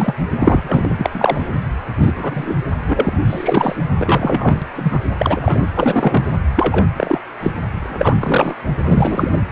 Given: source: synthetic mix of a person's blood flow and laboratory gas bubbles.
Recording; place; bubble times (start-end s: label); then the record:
Doppler ultrasound of blood flow; precordium
0.00-0.14 s: bubbles
0.40-0.96 s: bubbles
0.98-1.09 s: bubbles
1.14-1.52 s: bubbles
2.02-2.13 s: bubbles
2.16-2.56 s: bubbles
2.87-3.18 s: bubbles
3.27-3.75 s: bubbles
3.99-4.66 s: bubbles
4.76-4.99 s: bubbles
5.19-5.67 s: bubbles
5.75-6.27 s: bubbles
6.56-6.86 s: bubbles
6.97-7.18 s: bubbles
7.42-7.50 s: bubbles
7.79-8.14 s: bubbles
8.20-8.54 s: bubbles
8.84-9.39 s: bubbles
From the record:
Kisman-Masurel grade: 243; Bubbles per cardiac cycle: several, 3 to 8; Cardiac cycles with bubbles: 100%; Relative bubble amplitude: loud (0.450 to 0.775); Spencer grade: 3 (all of the cardiac periods contain showers or single bubble signals, but not dominating or overriding the cardiac motion signals); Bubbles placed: anywhere in the cardiac cycle